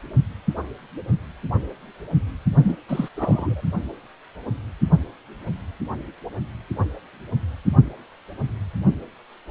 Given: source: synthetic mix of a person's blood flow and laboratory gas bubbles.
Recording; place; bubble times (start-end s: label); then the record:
Doppler ultrasound of blood flow; precordium
2.63-2.75 s: bubbles
2.89-3.08 s: bubbles
3.16-3.61 s: bubbles
From the record:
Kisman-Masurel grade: 212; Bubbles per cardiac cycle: several, 3 to 8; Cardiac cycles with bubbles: 1 to 10%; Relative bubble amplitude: moderate (0.250 to 0.450); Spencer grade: 1 (occasional bubble signal discernible with the cardiac motion signal, with majority of cardiac periods free of bubbles); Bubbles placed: only in the low amplitude regions of the cardiac cycle